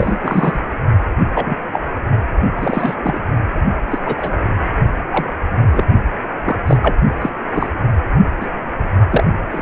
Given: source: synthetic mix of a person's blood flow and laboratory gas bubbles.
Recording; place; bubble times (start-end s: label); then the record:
Doppler ultrasound of blood flow; precordium
0.00-0.60 s: bubbles
1.34-1.55 s: bubbles
1.73-1.79 s: bubbles
2.55-2.95 s: bubbles
3.02-3.25 s: bubbles
3.91-3.98 s: bubbles
4.04-4.33 s: bubbles
5.12-5.26 s: bubbles
5.71-5.85 s: bubbles
6.45-6.57 s: bubbles
6.67-6.78 s: bubbles
6.82-6.95 s: bubbles
7.21-7.29 s: bubbles
7.54-7.73 s: bubbles
8.41-8.46 s: bubbles
9.10-9.24 s: bubbles
9.51-9.62 s: bubbles
From the record:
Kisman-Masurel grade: 243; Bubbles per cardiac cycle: several, 3 to 8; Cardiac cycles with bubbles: 100%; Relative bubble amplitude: loud (0.450 to 0.775); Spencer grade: 3 (all of the cardiac periods contain showers or single bubble signals, but not dominating or overriding the cardiac motion signals); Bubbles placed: only in the low amplitude regions of the cardiac cycle